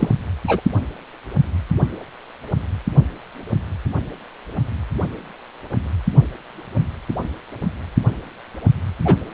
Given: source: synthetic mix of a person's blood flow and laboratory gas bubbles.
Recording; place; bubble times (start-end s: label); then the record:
Doppler ultrasound of blood flow; precordium
0.00-0.08 s: bubbles
0.47-0.61 s: bubbles
9.04-9.16 s: bubbles
From the record:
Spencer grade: 2 (many but less than half of the cardiac periods contain bubble signals, singularly or in groups); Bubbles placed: only in the low amplitude regions of the cardiac cycle